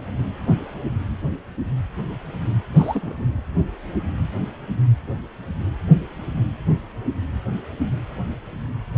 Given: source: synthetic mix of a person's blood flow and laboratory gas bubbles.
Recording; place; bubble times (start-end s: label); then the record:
Doppler ultrasound of blood flow; precordium
2.75-3.25 s: bubbles
From the record:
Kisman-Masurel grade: 211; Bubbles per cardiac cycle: several, 3 to 8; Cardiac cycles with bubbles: 1 to 10%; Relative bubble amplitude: barely perceptible (0.100 to 0.250); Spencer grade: 1 (occasional bubble signal discernible with the cardiac motion signal, with majority of cardiac periods free of bubbles); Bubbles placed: anywhere in the cardiac cycle